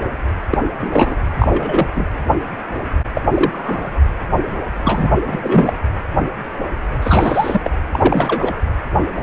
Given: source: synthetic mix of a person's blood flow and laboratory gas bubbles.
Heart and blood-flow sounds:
Doppler ultrasound of blood flow; precordium
0.51-0.57 s: bubbles
0.80-1.16 s: bubbles
1.38-1.86 s: bubbles
1.96-2.06 s: bubbles
3.15-3.22 s: bubbles
3.33-3.93 s: bubbles
4.83-5.19 s: bubbles
5.26-5.73 s: bubbles
7.01-7.70 s: bubbles
7.92-8.54 s: bubbles
From the record:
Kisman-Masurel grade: 233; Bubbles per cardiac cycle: several, 3 to 8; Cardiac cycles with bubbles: 50 to 99%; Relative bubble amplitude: loud (0.450 to 0.775); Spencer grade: 3 (all of the cardiac periods contain showers or single bubble signals, but not dominating or overriding the cardiac motion signals); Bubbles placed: anywhere in the cardiac cycle

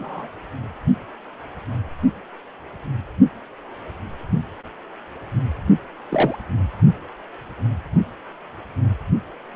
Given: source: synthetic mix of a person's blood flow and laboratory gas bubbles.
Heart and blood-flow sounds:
Doppler ultrasound of blood flow; precordium
0.00-0.28 s: bubbles
6.11-6.37 s: bubbles
From the record:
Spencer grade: 2 (many but less than half of the cardiac periods contain bubble signals, singularly or in groups); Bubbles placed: only in the low amplitude regions of the cardiac cycle

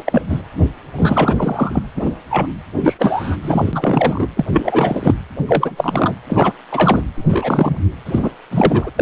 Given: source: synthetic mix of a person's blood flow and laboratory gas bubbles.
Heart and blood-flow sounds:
Doppler ultrasound of blood flow; precordium
0.00-0.22 s: bubbles
0.29-0.42 s: bubbles
0.97-1.83 s: bubbles
1.96-2.10 s: bubbles
2.30-2.47 s: bubbles
2.77-2.94 s: bubbles
2.98-3.36 s: bubbles
3.42-4.26 s: bubbles
4.36-4.45 s: bubbles
4.52-5.14 s: bubbles
5.47-6.13 s: bubbles
6.29-6.53 s: bubbles
6.71-7.02 s: bubbles
7.15-7.81 s: bubbles
8.05-8.30 s: bubbles
8.51-8.90 s: bubbles
8.96-9.02 s: bubbles
From the record:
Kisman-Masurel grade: 343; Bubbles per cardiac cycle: rolling drumbeat, 9 or more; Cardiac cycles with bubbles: 100%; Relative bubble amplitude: loud (0.450 to 0.775); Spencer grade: 3 (all of the cardiac periods contain showers or single bubble signals, but not dominating or overriding the cardiac motion signals); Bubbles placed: anywhere in the cardiac cycle

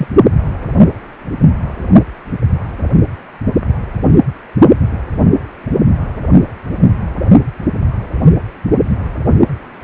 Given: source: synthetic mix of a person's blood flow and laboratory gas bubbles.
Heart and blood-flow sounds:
Doppler ultrasound of blood flow; precordium
0.00-0.07 s: bubbles
From the record:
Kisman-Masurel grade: 213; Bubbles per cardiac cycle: several, 3 to 8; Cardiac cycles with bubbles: 1 to 10%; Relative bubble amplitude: loud (0.450 to 0.775); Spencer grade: 1 (occasional bubble signal discernible with the cardiac motion signal, with majority of cardiac periods free of bubbles); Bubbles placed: only in the low amplitude regions of the cardiac cycle

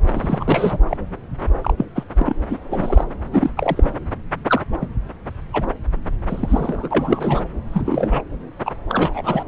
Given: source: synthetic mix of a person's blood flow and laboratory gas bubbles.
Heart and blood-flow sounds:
Doppler ultrasound of blood flow; subclavian vein
0.07-0.78 s: bubbles
0.88-0.97 s: bubbles
1.62-1.73 s: bubbles
1.77-1.85 s: bubbles
1.95-2.03 s: bubbles
2.19-2.36 s: bubbles
2.50-2.58 s: bubbles
2.70-3.05 s: bubbles
3.32-3.50 s: bubbles
3.57-3.90 s: bubbles
4.47-4.61 s: bubbles
4.81-4.86 s: bubbles
5.53-5.66 s: bubbles
6.26-6.88 s: bubbles
6.90-7.42 s: bubbles
7.71-8.21 s: bubbles
8.66-8.73 s: bubbles
8.89-9.43 s: bubbles
From the record:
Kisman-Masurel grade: 242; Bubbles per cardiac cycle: several, 3 to 8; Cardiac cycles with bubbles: 100%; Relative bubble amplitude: moderate (0.250 to 0.450); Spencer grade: 3 (all of the cardiac periods contain showers or single bubble signals, but not dominating or overriding the cardiac motion signals); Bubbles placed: anywhere in the cardiac cycle

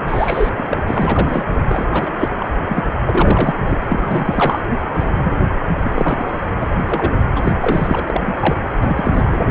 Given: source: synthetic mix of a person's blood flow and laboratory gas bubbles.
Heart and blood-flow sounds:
Doppler ultrasound of blood flow; precordium
0.08-0.49 s: bubbles
0.52-0.77 s: bubbles
0.86-1.46 s: bubbles
1.69-1.87 s: bubbles
1.91-2.12 s: bubbles
2.19-2.30 s: bubbles
2.40-2.46 s: bubbles
2.67-2.83 s: bubbles
3.06-3.55 s: bubbles
3.69-3.79 s: bubbles
3.89-4.60 s: bubbles
4.95-5.12 s: bubbles
5.24-5.35 s: bubbles
5.83-5.92 s: bubbles
5.95-6.33 s: bubbles
6.60-6.66 s: bubbles
6.74-6.78 s: bubbles
6.87-7.12 s: bubbles
7.35-7.41 s: bubbles
7.44-7.54 s: bubbles
7.60-8.23 s: bubbles
8.26-8.35 s: bubbles
8.40-8.58 s: bubbles
8.80-9.51 s: bubbles
From the record:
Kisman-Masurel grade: 342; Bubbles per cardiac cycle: rolling drumbeat, 9 or more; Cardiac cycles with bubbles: 100%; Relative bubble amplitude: moderate (0.250 to 0.450); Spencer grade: 3 (all of the cardiac periods contain showers or single bubble signals, but not dominating or overriding the cardiac motion signals); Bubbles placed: anywhere in the cardiac cycle

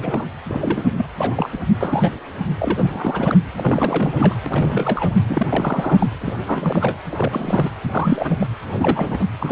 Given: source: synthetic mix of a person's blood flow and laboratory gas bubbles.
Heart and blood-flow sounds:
Doppler ultrasound of blood flow; precordium
0.00-0.25 s: bubbles
0.48-0.94 s: bubbles
0.97-1.05 s: bubbles
1.17-1.49 s: bubbles
1.52-1.58 s: bubbles
1.81-2.10 s: bubbles
2.58-3.38 s: bubbles
3.55-4.35 s: bubbles
4.46-5.14 s: bubbles
5.28-6.07 s: bubbles
6.21-6.34 s: bubbles
6.46-7.01 s: bubbles
7.10-7.70 s: bubbles
7.83-8.47 s: bubbles
8.73-9.27 s: bubbles
9.40-9.52 s: bubbles
From the record:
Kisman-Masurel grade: 332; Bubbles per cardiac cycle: rolling drumbeat, 9 or more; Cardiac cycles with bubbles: 50 to 99%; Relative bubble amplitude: moderate (0.250 to 0.450); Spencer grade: 3 (all of the cardiac periods contain showers or single bubble signals, but not dominating or overriding the cardiac motion signals); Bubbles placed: anywhere in the cardiac cycle

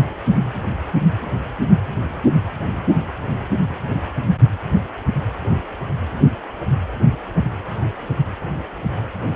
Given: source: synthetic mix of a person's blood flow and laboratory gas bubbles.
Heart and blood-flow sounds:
Doppler ultrasound of blood flow; precordium
no bubbles
From the record:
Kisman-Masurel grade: 000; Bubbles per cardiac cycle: 0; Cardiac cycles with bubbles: 0%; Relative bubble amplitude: no bubbles discernible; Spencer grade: 0 (complete lack of bubble signals)

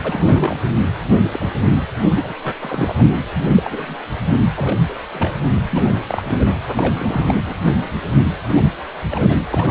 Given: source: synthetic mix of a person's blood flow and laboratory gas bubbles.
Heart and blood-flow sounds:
Doppler ultrasound of blood flow; precordium
0.00-0.56 s: bubbles
1.24-1.50 s: bubbles
2.15-2.35 s: bubbles
2.44-2.54 s: bubbles
2.62-2.94 s: bubbles
2.98-3.06 s: bubbles
3.56-3.95 s: bubbles
4.56-4.76 s: bubbles
4.88-4.95 s: bubbles
5.13-5.33 s: bubbles
5.41-5.58 s: bubbles
5.70-6.03 s: bubbles
6.08-6.56 s: bubbles
6.68-7.43 s: bubbles
7.46-7.55 s: bubbles
7.65-7.87 s: bubbles
8.14-8.22 s: bubbles
8.48-8.62 s: bubbles
9.11-9.38 s: bubbles
9.51-9.70 s: bubbles
From the record:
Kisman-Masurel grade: 242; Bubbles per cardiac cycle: several, 3 to 8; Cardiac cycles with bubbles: 100%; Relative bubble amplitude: moderate (0.250 to 0.450); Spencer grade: 3 (all of the cardiac periods contain showers or single bubble signals, but not dominating or overriding the cardiac motion signals); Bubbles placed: anywhere in the cardiac cycle

